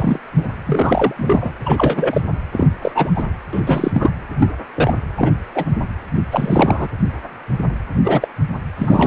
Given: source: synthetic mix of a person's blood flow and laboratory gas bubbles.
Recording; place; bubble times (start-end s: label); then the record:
Doppler ultrasound of blood flow; precordium
0.00-0.19 s: bubbles
0.36-0.48 s: bubbles
0.67-1.14 s: bubbles
1.17-1.52 s: bubbles
1.63-2.21 s: bubbles
2.52-2.67 s: bubbles
2.82-2.92 s: bubbles
2.95-3.12 s: bubbles
3.15-3.24 s: bubbles
3.53-3.61 s: bubbles
3.65-4.10 s: bubbles
4.39-4.51 s: bubbles
4.76-4.93 s: bubbles
5.17-5.31 s: bubbles
5.54-5.65 s: bubbles
6.31-6.88 s: bubbles
8.04-8.28 s: bubbles
8.78-9.07 s: bubbles
From the record:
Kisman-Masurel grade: 233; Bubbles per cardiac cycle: several, 3 to 8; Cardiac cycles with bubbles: 50 to 99%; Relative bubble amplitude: loud (0.450 to 0.775); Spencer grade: 3 (all of the cardiac periods contain showers or single bubble signals, but not dominating or overriding the cardiac motion signals); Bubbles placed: anywhere in the cardiac cycle